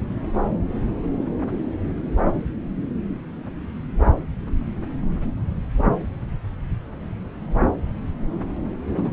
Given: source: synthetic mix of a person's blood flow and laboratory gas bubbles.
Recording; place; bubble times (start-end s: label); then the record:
Doppler ultrasound of blood flow; subclavian vein
8.96-9.11 s: bubbles
From the record:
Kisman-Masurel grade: 112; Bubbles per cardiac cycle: 1 to 2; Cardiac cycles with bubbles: 1 to 10%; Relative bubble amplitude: moderate (0.250 to 0.450); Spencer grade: 1 (occasional bubble signal discernible with the cardiac motion signal, with majority of cardiac periods free of bubbles); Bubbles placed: anywhere in the cardiac cycle